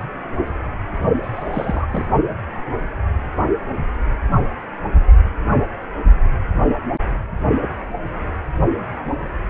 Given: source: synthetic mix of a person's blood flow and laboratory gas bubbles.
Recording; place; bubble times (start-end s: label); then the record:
Doppler ultrasound of blood flow; precordium
1.23-1.86 s: bubbles
1.93-2.05 s: bubbles
From the record:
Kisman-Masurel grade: 211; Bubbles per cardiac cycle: several, 3 to 8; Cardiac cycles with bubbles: 1 to 10%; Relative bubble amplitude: barely perceptible (0.100 to 0.250); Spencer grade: 1 (occasional bubble signal discernible with the cardiac motion signal, with majority of cardiac periods free of bubbles); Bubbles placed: only in the low amplitude regions of the cardiac cycle